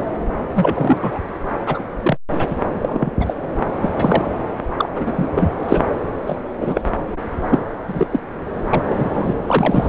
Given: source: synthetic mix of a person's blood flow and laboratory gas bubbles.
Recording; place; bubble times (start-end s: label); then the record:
Doppler ultrasound of blood flow; subclavian vein
0.54-1.19 s: bubbles
1.66-1.82 s: bubbles
2.02-2.17 s: bubbles
2.38-2.47 s: bubbles
2.50-2.56 s: bubbles
2.84-3.11 s: bubbles
3.20-3.34 s: bubbles
3.81-3.90 s: bubbles
3.96-4.28 s: bubbles
4.78-4.89 s: bubbles
4.95-5.28 s: bubbles
5.35-5.50 s: bubbles
5.68-5.83 s: bubbles
6.26-6.37 s: bubbles
6.60-6.81 s: bubbles
7.50-7.59 s: bubbles
7.88-8.20 s: bubbles
8.73-8.83 s: bubbles
8.89-9.34 s: bubbles
9.48-9.89 s: bubbles
From the record:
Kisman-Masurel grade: 233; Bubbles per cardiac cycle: several, 3 to 8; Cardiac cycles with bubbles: 50 to 99%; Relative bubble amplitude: loud (0.450 to 0.775); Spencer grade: 3 (all of the cardiac periods contain showers or single bubble signals, but not dominating or overriding the cardiac motion signals); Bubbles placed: anywhere in the cardiac cycle